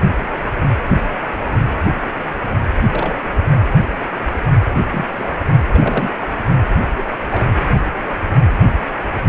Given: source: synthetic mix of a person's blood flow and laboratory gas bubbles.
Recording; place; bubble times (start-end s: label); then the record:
Doppler ultrasound of blood flow; precordium
2.77-2.81 s: bubbles
2.87-3.18 s: bubbles
3.51-3.73 s: bubbles
4.72-4.86 s: bubbles
4.92-5.05 s: bubbles
5.17-5.32 s: bubbles
5.75-6.09 s: bubbles
6.20-6.28 s: bubbles
6.79-6.89 s: bubbles
6.96-7.05 s: bubbles
7.21-7.25 s: bubbles
7.31-7.67 s: bubbles
From the record:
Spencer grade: 2 (many but less than half of the cardiac periods contain bubble signals, singularly or in groups); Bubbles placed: anywhere in the cardiac cycle